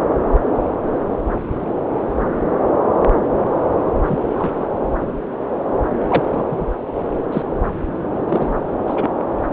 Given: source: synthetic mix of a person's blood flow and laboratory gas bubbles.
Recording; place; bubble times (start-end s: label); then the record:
Doppler ultrasound of blood flow; subclavian vein
4.09-4.17 s: bubbles
4.34-4.69 s: bubbles
6.08-6.23 s: bubbles
6.32-6.44 s: bubbles
6.50-6.67 s: bubbles
7.32-7.42 s: bubbles
8.28-8.49 s: bubbles
8.87-9.07 s: bubbles
From the record:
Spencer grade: 2 (many but less than half of the cardiac periods contain bubble signals, singularly or in groups); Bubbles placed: anywhere in the cardiac cycle